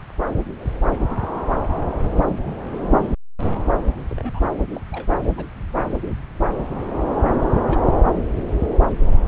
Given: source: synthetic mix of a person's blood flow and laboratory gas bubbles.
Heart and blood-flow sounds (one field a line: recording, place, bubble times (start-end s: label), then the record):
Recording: Doppler ultrasound of blood flow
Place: subclavian vein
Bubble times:
2.97-3.15 s: bubbles
4.10-4.14 s: bubbles
4.17-4.39 s: bubbles
4.62-4.64 s: bubbles
4.75-4.80 s: bubbles
4.92-5.06 s: bubbles
5.37-5.44 s: bubbles
6.47-6.64 s: bubbles
7.71-7.76 s: bubbles
From the record:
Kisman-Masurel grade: 121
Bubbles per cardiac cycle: 1 to 2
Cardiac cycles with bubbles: 10 to 50%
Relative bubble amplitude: barely perceptible (0.100 to 0.250)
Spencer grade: 2 (many but less than half of the cardiac periods contain bubble signals, singularly or in groups)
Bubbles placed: anywhere in the cardiac cycle